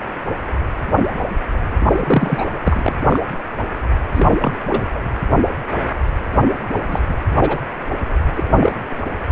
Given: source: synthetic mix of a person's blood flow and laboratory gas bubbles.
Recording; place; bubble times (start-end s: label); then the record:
Doppler ultrasound of blood flow; precordium
1.92-2.60 s: bubbles
2.65-2.94 s: bubbles
3.10-3.19 s: bubbles
4.13-4.57 s: bubbles
4.66-4.82 s: bubbles
4.94-4.99 s: bubbles
6.88-7.01 s: bubbles
7.08-7.14 s: bubbles
7.38-7.60 s: bubbles
8.35-8.72 s: bubbles
From the record:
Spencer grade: 2 (many but less than half of the cardiac periods contain bubble signals, singularly or in groups); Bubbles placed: anywhere in the cardiac cycle